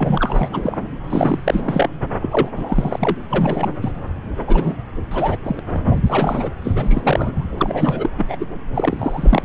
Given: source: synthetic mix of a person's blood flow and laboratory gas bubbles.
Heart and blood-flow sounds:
Doppler ultrasound of blood flow; subclavian vein
0.00-0.49 s: bubbles
0.51-0.78 s: bubbles
1.07-1.90 s: bubbles
2.21-2.49 s: bubbles
2.55-3.16 s: bubbles
3.30-3.73 s: bubbles
3.81-3.91 s: bubbles
4.47-4.76 s: bubbles
5.11-5.39 s: bubbles
5.45-5.60 s: bubbles
5.74-5.79 s: bubbles
5.86-6.02 s: bubbles
6.06-6.50 s: bubbles
6.63-7.49 s: bubbles
7.57-8.10 s: bubbles
8.18-8.36 s: bubbles
8.40-8.46 s: bubbles
8.74-9.42 s: bubbles
From the record:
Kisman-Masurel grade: 342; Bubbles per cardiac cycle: rolling drumbeat, 9 or more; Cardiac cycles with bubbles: 100%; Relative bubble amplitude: moderate (0.250 to 0.450); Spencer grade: 3 (all of the cardiac periods contain showers or single bubble signals, but not dominating or overriding the cardiac motion signals); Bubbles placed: anywhere in the cardiac cycle

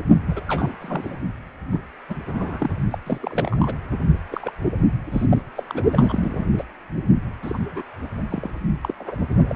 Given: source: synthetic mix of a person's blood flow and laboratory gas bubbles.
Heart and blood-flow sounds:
Doppler ultrasound of blood flow; precordium
0.27-0.41 s: bubbles
0.47-0.76 s: bubbles
0.80-1.18 s: bubbles
1.72-1.80 s: bubbles
2.09-2.15 s: bubbles
2.25-2.70 s: bubbles
2.90-2.98 s: bubbles
3.05-3.74 s: bubbles
4.31-4.52 s: bubbles
5.12-5.26 s: bubbles
5.29-5.42 s: bubbles
5.56-5.63 s: bubbles
5.67-5.84 s: bubbles
5.92-6.46 s: bubbles
6.58-6.64 s: bubbles
7.42-7.58 s: bubbles
7.71-7.82 s: bubbles
8.29-8.50 s: bubbles
8.81-8.94 s: bubbles
8.99-9.15 s: bubbles
9.30-9.35 s: bubbles
9.47-9.56 s: bubbles
From the record:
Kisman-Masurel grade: 242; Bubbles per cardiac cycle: several, 3 to 8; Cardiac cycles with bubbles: 100%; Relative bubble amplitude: moderate (0.250 to 0.450); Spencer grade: 3 (all of the cardiac periods contain showers or single bubble signals, but not dominating or overriding the cardiac motion signals); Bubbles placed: only in the low amplitude regions of the cardiac cycle

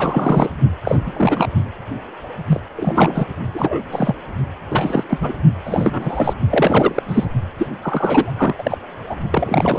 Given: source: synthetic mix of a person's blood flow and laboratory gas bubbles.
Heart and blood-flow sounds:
Doppler ultrasound of blood flow; precordium
0.00-0.49 s: bubbles
0.84-0.96 s: bubbles
1.06-1.49 s: bubbles
2.46-2.60 s: bubbles
2.76-3.27 s: bubbles
3.54-3.80 s: bubbles
3.91-4.14 s: bubbles
4.71-5.04 s: bubbles
5.08-5.33 s: bubbles
5.64-6.33 s: bubbles
6.50-7.02 s: bubbles
7.08-7.26 s: bubbles
7.58-7.67 s: bubbles
7.82-8.54 s: bubbles
8.59-8.78 s: bubbles
9.10-9.15 s: bubbles
9.32-9.79 s: bubbles
From the record:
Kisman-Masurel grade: 342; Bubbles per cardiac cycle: rolling drumbeat, 9 or more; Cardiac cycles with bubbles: 100%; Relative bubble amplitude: moderate (0.250 to 0.450); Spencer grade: 3 (all of the cardiac periods contain showers or single bubble signals, but not dominating or overriding the cardiac motion signals); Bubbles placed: only in the low amplitude regions of the cardiac cycle

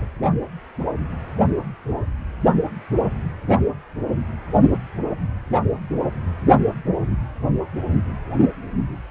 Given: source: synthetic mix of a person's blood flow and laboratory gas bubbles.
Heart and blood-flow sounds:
Doppler ultrasound of blood flow; precordium
0.00-0.05 s: bubbles
From the record:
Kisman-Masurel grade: 211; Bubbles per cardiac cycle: several, 3 to 8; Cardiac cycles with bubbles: 1 to 10%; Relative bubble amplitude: barely perceptible (0.100 to 0.250); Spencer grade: 1 (occasional bubble signal discernible with the cardiac motion signal, with majority of cardiac periods free of bubbles); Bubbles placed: only in the low amplitude regions of the cardiac cycle

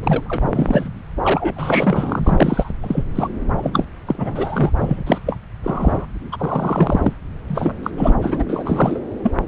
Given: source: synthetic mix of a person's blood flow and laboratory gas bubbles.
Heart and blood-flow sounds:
Doppler ultrasound of blood flow; subclavian vein
0.03-0.89 s: bubbles
1.22-2.71 s: bubbles
2.81-3.04 s: bubbles
3.15-3.27 s: bubbles
3.56-3.85 s: bubbles
4.07-4.71 s: bubbles
4.80-5.04 s: bubbles
5.07-5.19 s: bubbles
5.26-5.37 s: bubbles
5.64-6.06 s: bubbles
6.32-7.14 s: bubbles
7.49-7.73 s: bubbles
7.83-7.91 s: bubbles
7.98-8.15 s: bubbles
8.21-8.44 s: bubbles
8.49-8.99 s: bubbles
9.23-9.30 s: bubbles
From the record:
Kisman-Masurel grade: 342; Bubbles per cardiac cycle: rolling drumbeat, 9 or more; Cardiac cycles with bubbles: 100%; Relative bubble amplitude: moderate (0.250 to 0.450); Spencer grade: 3 (all of the cardiac periods contain showers or single bubble signals, but not dominating or overriding the cardiac motion signals); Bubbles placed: anywhere in the cardiac cycle

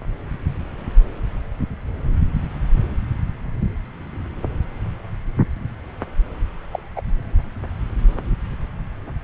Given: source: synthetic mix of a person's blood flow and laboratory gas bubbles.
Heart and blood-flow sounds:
Doppler ultrasound of blood flow; subclavian vein
6.72-6.80 s: bubbles
6.95-7.01 s: bubbles
From the record:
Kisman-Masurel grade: 112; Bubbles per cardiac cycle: 1 to 2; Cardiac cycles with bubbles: 1 to 10%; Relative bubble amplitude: moderate (0.250 to 0.450); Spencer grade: 1 (occasional bubble signal discernible with the cardiac motion signal, with majority of cardiac periods free of bubbles); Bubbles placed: anywhere in the cardiac cycle

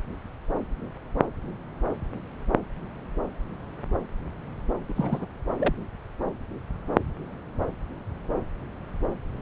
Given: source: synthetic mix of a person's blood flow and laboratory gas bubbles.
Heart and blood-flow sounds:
Doppler ultrasound of blood flow; subclavian vein
4.89-4.93 s: bubbles
4.96-5.26 s: bubbles
5.58-5.75 s: bubbles
From the record:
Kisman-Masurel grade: 211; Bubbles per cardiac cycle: several, 3 to 8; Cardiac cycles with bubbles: 1 to 10%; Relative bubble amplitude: barely perceptible (0.100 to 0.250); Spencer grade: 1 (occasional bubble signal discernible with the cardiac motion signal, with majority of cardiac periods free of bubbles); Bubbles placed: anywhere in the cardiac cycle

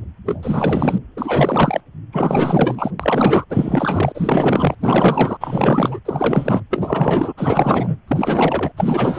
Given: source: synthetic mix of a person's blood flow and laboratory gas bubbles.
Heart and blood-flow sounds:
Doppler ultrasound of blood flow; precordium
0.26-0.98 s: bubbles
1.17-1.81 s: bubbles
2.12-2.90 s: bubbles
3.00-3.44 s: bubbles
3.49-4.75 s: bubbles
4.80-5.37 s: bubbles
5.40-5.99 s: bubbles
6.05-6.63 s: bubbles
6.70-7.33 s: bubbles
7.37-7.97 s: bubbles
8.07-8.72 s: bubbles
8.77-9.19 s: bubbles
From the record:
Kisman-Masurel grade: 444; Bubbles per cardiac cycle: continuous sound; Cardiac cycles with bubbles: 100%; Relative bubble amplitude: maximal (0.775 to 0.999); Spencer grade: 4 (maximum detectable bubble signal sounding continuously throughout systole and diastole of every cardiac period, and overriding the amplitude of the normal cardiac signals); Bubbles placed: anywhere in the cardiac cycle

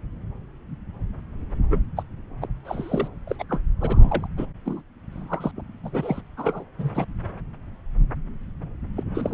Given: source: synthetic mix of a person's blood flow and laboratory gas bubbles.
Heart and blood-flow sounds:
Doppler ultrasound of blood flow; subclavian vein
1.70-1.82 s: bubbles
1.96-2.03 s: bubbles
2.41-2.48 s: bubbles
2.65-3.08 s: bubbles
3.27-3.35 s: bubbles
3.38-3.44 s: bubbles
3.49-3.60 s: bubbles
3.80-4.27 s: bubbles
4.37-4.46 s: bubbles
4.65-4.83 s: bubbles
5.12-5.51 s: bubbles
5.56-5.61 s: bubbles
5.83-6.21 s: bubbles
6.37-6.64 s: bubbles
6.78-7.05 s: bubbles
8.96-9.03 s: bubbles
9.14-9.34 s: bubbles
From the record:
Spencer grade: 3 (all of the cardiac periods contain showers or single bubble signals, but not dominating or overriding the cardiac motion signals); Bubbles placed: anywhere in the cardiac cycle

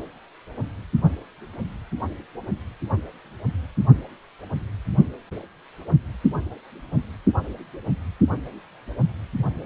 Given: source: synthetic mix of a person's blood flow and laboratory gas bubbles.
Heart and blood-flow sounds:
Doppler ultrasound of blood flow; precordium
no bubbles
From the record:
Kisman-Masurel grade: 000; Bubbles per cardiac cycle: 0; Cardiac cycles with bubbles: 0%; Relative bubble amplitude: no bubbles discernible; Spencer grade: 0 (complete lack of bubble signals)

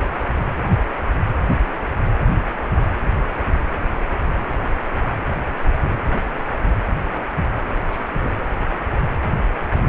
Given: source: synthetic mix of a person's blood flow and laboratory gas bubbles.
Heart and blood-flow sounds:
Doppler ultrasound of blood flow; precordium
7.90-8.02 s: bubbles
8.22-8.30 s: bubbles
From the record:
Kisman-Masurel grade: 111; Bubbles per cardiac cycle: 1 to 2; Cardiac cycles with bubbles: 1 to 10%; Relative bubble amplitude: barely perceptible (0.100 to 0.250); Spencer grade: 1 (occasional bubble signal discernible with the cardiac motion signal, with majority of cardiac periods free of bubbles); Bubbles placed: anywhere in the cardiac cycle

